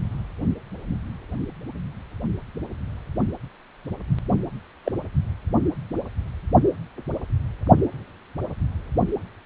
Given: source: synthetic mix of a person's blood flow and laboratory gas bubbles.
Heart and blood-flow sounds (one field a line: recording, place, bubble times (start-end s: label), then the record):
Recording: Doppler ultrasound of blood flow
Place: precordium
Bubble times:
4.84-4.92 s: bubbles
From the record:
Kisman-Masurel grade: 112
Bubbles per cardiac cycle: 1 to 2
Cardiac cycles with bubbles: 1 to 10%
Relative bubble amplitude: moderate (0.250 to 0.450)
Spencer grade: 1 (occasional bubble signal discernible with the cardiac motion signal, with majority of cardiac periods free of bubbles)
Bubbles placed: only in the low amplitude regions of the cardiac cycle